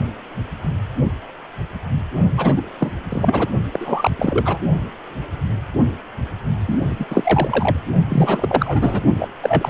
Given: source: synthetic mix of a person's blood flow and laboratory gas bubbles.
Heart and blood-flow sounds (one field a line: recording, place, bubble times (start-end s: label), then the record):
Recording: Doppler ultrasound of blood flow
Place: precordium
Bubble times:
2.37-2.69 s: bubbles
2.79-2.92 s: bubbles
3.10-3.49 s: bubbles
3.72-4.11 s: bubbles
4.18-4.59 s: bubbles
6.60-7.05 s: bubbles
7.10-7.77 s: bubbles
8.08-9.04 s: bubbles
9.19-9.29 s: bubbles
9.42-9.70 s: bubbles
From the record:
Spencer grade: 3 (all of the cardiac periods contain showers or single bubble signals, but not dominating or overriding the cardiac motion signals)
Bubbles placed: only in the low amplitude regions of the cardiac cycle